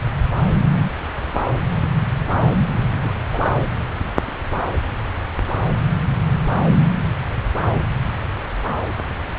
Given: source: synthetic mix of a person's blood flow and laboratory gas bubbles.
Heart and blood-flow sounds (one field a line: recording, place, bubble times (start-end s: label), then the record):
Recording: Doppler ultrasound of blood flow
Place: subclavian vein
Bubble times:
2.92-3.11 s: bubbles
3.32-3.54 s: bubbles
From the record:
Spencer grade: 1 (occasional bubble signal discernible with the cardiac motion signal, with majority of cardiac periods free of bubbles)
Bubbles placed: anywhere in the cardiac cycle